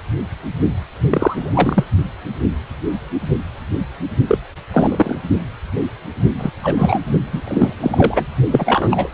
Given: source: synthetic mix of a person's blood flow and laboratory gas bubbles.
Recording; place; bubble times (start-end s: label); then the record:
Doppler ultrasound of blood flow; precordium
1.10-1.84 s: bubbles
4.27-4.38 s: bubbles
4.73-5.17 s: bubbles
6.38-6.51 s: bubbles
6.63-6.99 s: bubbles
7.32-7.42 s: bubbles
7.47-7.73 s: bubbles
7.80-8.25 s: bubbles
8.50-9.09 s: bubbles
From the record:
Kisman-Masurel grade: 223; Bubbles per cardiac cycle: several, 3 to 8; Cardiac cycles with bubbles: 10 to 50%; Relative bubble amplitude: loud (0.450 to 0.775); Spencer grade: 2 (many but less than half of the cardiac periods contain bubble signals, singularly or in groups); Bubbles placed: only in the low amplitude regions of the cardiac cycle